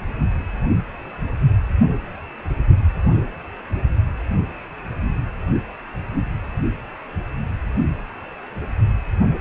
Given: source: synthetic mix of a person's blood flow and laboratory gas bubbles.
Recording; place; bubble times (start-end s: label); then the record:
Doppler ultrasound of blood flow; precordium
no bubbles
From the record:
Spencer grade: 0 (complete lack of bubble signals)